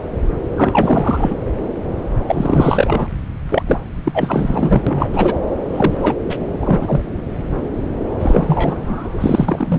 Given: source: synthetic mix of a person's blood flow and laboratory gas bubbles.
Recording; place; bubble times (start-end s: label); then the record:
Doppler ultrasound of blood flow; subclavian vein
0.56-1.35 s: bubbles
2.28-3.08 s: bubbles
3.49-3.62 s: bubbles
3.67-3.80 s: bubbles
4.04-4.82 s: bubbles
4.87-5.09 s: bubbles
5.12-5.34 s: bubbles
5.72-6.13 s: bubbles
6.29-6.37 s: bubbles
6.62-7.01 s: bubbles
8.20-9.79 s: bubbles
From the record:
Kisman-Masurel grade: 333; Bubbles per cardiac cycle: rolling drumbeat, 9 or more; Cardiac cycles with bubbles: 50 to 99%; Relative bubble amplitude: loud (0.450 to 0.775); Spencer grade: 3 (all of the cardiac periods contain showers or single bubble signals, but not dominating or overriding the cardiac motion signals); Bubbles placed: anywhere in the cardiac cycle